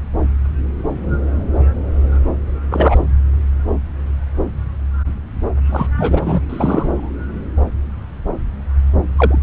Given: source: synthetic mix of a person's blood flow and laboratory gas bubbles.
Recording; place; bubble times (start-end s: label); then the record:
Doppler ultrasound of blood flow; subclavian vein
2.70-2.98 s: bubbles
5.71-5.87 s: bubbles
5.97-6.41 s: bubbles
6.49-7.11 s: bubbles
9.17-9.38 s: bubbles
From the record:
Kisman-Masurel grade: 223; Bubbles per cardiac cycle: several, 3 to 8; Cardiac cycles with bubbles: 10 to 50%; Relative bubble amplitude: loud (0.450 to 0.775); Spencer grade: 2 (many but less than half of the cardiac periods contain bubble signals, singularly or in groups); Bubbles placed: anywhere in the cardiac cycle